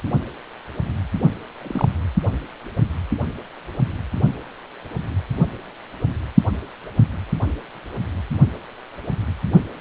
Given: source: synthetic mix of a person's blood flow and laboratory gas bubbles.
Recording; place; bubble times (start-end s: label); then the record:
Doppler ultrasound of blood flow; precordium
1.61-1.88 s: bubbles
From the record:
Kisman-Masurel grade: 111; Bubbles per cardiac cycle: 1 to 2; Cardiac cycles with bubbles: 1 to 10%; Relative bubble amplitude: barely perceptible (0.100 to 0.250); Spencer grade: 1 (occasional bubble signal discernible with the cardiac motion signal, with majority of cardiac periods free of bubbles); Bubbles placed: only in the low amplitude regions of the cardiac cycle